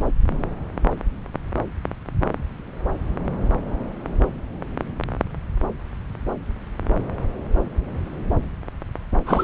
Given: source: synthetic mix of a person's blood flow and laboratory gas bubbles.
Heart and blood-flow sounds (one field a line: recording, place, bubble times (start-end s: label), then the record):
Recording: Doppler ultrasound of blood flow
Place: subclavian vein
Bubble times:
9.26-9.44 s: bubbles
From the record:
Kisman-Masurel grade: 123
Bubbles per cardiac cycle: 1 to 2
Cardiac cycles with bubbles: 10 to 50%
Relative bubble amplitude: loud (0.450 to 0.775)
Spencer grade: 2 (many but less than half of the cardiac periods contain bubble signals, singularly or in groups)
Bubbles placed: anywhere in the cardiac cycle